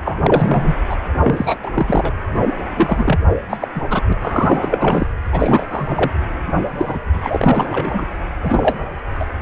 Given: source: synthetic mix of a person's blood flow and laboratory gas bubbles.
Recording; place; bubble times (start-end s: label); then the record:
Doppler ultrasound of blood flow; precordium
0.04-0.76 s: bubbles
0.89-0.96 s: bubbles
1.23-1.72 s: bubbles
1.75-2.11 s: bubbles
2.76-3.20 s: bubbles
3.50-3.57 s: bubbles
3.60-3.68 s: bubbles
3.75-3.81 s: bubbles
3.90-4.01 s: bubbles
4.07-4.13 s: bubbles
4.21-5.07 s: bubbles
5.32-5.65 s: bubbles
5.70-6.11 s: bubbles
6.77-6.99 s: bubbles
7.13-8.06 s: bubbles
8.42-8.76 s: bubbles
9.19-9.25 s: bubbles
From the record:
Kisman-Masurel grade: 343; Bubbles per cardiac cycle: rolling drumbeat, 9 or more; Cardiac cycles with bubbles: 100%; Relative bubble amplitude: loud (0.450 to 0.775); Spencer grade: 3 (all of the cardiac periods contain showers or single bubble signals, but not dominating or overriding the cardiac motion signals); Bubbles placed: anywhere in the cardiac cycle